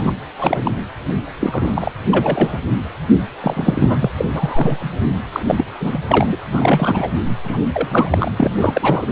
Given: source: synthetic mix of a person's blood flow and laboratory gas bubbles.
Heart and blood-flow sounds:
Doppler ultrasound of blood flow; precordium
0.00-0.15 s: bubbles
0.39-0.60 s: bubbles
0.65-0.72 s: bubbles
1.40-1.92 s: bubbles
2.11-2.58 s: bubbles
3.43-4.11 s: bubbles
4.17-4.26 s: bubbles
4.35-4.88 s: bubbles
5.32-5.43 s: bubbles
5.47-5.64 s: bubbles
5.79-5.98 s: bubbles
6.07-6.36 s: bubbles
6.52-7.08 s: bubbles
7.44-7.58 s: bubbles
7.71-8.31 s: bubbles
8.38-8.50 s: bubbles
8.55-9.06 s: bubbles
From the record:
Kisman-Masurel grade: 343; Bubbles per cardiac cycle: rolling drumbeat, 9 or more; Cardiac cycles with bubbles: 100%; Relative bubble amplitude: loud (0.450 to 0.775); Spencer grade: 3 (all of the cardiac periods contain showers or single bubble signals, but not dominating or overriding the cardiac motion signals); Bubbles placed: anywhere in the cardiac cycle

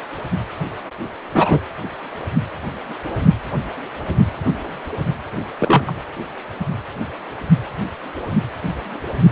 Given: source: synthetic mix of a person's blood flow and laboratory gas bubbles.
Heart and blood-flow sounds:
Doppler ultrasound of blood flow; precordium
1.34-1.59 s: bubbles
5.59-5.93 s: bubbles
From the record:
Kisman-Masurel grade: 123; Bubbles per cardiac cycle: 1 to 2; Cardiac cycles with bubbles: 10 to 50%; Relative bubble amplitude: loud (0.450 to 0.775); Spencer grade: 2 (many but less than half of the cardiac periods contain bubble signals, singularly or in groups); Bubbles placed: anywhere in the cardiac cycle

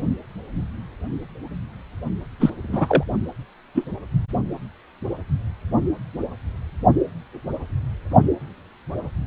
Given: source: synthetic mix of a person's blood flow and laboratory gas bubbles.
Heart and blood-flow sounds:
Doppler ultrasound of blood flow; precordium
2.40-2.50 s: bubbles
2.63-3.03 s: bubbles
3.74-3.85 s: bubbles
From the record:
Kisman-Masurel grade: 223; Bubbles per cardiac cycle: several, 3 to 8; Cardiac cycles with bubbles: 10 to 50%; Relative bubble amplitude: loud (0.450 to 0.775); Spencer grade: 2 (many but less than half of the cardiac periods contain bubble signals, singularly or in groups); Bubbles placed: only in the low amplitude regions of the cardiac cycle

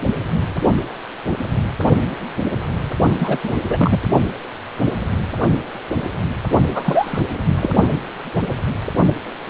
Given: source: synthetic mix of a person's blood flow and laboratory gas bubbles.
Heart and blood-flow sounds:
Doppler ultrasound of blood flow; precordium
3.12-3.38 s: bubbles
3.44-3.55 s: bubbles
3.68-3.99 s: bubbles
6.68-7.21 s: bubbles
7.47-7.71 s: bubbles
From the record:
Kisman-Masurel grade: 223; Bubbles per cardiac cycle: several, 3 to 8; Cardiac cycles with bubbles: 10 to 50%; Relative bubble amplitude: loud (0.450 to 0.775); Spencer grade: 2 (many but less than half of the cardiac periods contain bubble signals, singularly or in groups); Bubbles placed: only in the low amplitude regions of the cardiac cycle

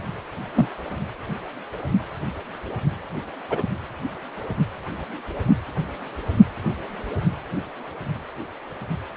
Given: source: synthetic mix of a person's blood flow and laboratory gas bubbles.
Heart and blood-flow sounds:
Doppler ultrasound of blood flow; precordium
0.54-0.69 s: bubbles
3.50-3.62 s: bubbles
From the record:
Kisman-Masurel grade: 122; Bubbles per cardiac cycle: 1 to 2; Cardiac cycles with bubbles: 10 to 50%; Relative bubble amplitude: moderate (0.250 to 0.450); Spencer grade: 2 (many but less than half of the cardiac periods contain bubble signals, singularly or in groups); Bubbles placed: anywhere in the cardiac cycle

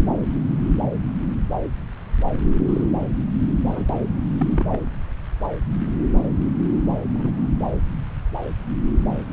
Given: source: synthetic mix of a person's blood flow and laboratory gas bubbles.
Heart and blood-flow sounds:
Doppler ultrasound of blood flow; subclavian vein
2.69-2.85 s: bubbles
3.69-3.86 s: bubbles
4.39-4.77 s: bubbles
7.14-7.32 s: bubbles
From the record:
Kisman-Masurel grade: 121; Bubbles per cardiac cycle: 1 to 2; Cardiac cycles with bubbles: 10 to 50%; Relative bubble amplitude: barely perceptible (0.100 to 0.250); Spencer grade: 2 (many but less than half of the cardiac periods contain bubble signals, singularly or in groups); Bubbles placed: anywhere in the cardiac cycle

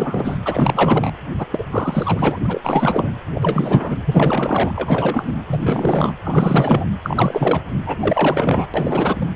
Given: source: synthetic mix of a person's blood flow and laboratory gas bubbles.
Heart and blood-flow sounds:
Doppler ultrasound of blood flow; precordium
0.00-0.40 s: bubbles
0.44-1.11 s: bubbles
1.39-1.46 s: bubbles
1.52-1.65 s: bubbles
1.71-2.39 s: bubbles
2.44-3.11 s: bubbles
3.34-4.00 s: bubbles
4.04-4.72 s: bubbles
4.76-5.35 s: bubbles
5.47-6.13 s: bubbles
6.24-6.85 s: bubbles
7.03-7.62 s: bubbles
7.86-8.67 s: bubbles
8.74-9.27 s: bubbles
From the record:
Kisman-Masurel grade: 444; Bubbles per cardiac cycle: continuous sound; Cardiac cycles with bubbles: 100%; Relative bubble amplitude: maximal (0.775 to 0.999); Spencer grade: 4 (maximum detectable bubble signal sounding continuously throughout systole and diastole of every cardiac period, and overriding the amplitude of the normal cardiac signals); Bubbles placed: anywhere in the cardiac cycle

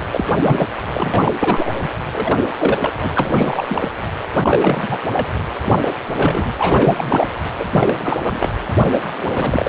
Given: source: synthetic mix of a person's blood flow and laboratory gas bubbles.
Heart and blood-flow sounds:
Doppler ultrasound of blood flow; precordium
0.00-0.02 s: bubbles
0.11-0.24 s: bubbles
0.37-0.67 s: bubbles
0.94-1.70 s: bubbles
1.81-1.89 s: bubbles
2.13-2.38 s: bubbles
2.57-2.92 s: bubbles
3.01-3.10 s: bubbles
3.15-3.88 s: bubbles
4.42-4.98 s: bubbles
5.13-5.28 s: bubbles
5.64-5.73 s: bubbles
5.81-5.89 s: bubbles
6.17-6.52 s: bubbles
6.58-7.29 s: bubbles
7.55-8.17 s: bubbles
8.24-8.50 s: bubbles
8.91-9.01 s: bubbles
9.17-9.69 s: bubbles
From the record:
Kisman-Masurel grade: 343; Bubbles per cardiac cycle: rolling drumbeat, 9 or more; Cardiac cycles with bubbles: 100%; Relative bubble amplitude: loud (0.450 to 0.775); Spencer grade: 3 (all of the cardiac periods contain showers or single bubble signals, but not dominating or overriding the cardiac motion signals); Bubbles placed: anywhere in the cardiac cycle

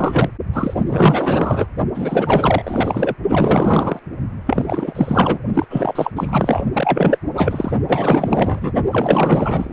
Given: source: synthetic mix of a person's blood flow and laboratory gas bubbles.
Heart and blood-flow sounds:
Doppler ultrasound of blood flow; precordium
0.00-0.29 s: bubbles
0.53-0.74 s: bubbles
0.86-1.67 s: bubbles
1.95-3.15 s: bubbles
3.29-4.00 s: bubbles
4.46-5.39 s: bubbles
5.54-5.66 s: bubbles
5.70-6.11 s: bubbles
6.16-6.63 s: bubbles
6.72-7.17 s: bubbles
7.35-7.71 s: bubbles
7.88-8.72 s: bubbles
8.91-9.73 s: bubbles
From the record:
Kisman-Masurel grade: 444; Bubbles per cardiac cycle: continuous sound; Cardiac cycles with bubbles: 100%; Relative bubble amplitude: maximal (0.775 to 0.999); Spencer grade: 4 (maximum detectable bubble signal sounding continuously throughout systole and diastole of every cardiac period, and overriding the amplitude of the normal cardiac signals); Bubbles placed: only in the low amplitude regions of the cardiac cycle

